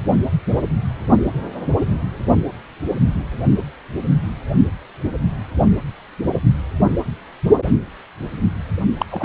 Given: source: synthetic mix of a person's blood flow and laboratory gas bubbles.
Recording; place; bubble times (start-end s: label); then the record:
Doppler ultrasound of blood flow; precordium
8.98-9.06 s: bubbles
9.09-9.25 s: bubbles
From the record:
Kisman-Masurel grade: 212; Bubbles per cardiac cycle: several, 3 to 8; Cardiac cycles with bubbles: 1 to 10%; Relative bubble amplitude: moderate (0.250 to 0.450); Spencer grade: 1 (occasional bubble signal discernible with the cardiac motion signal, with majority of cardiac periods free of bubbles); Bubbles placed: only in the low amplitude regions of the cardiac cycle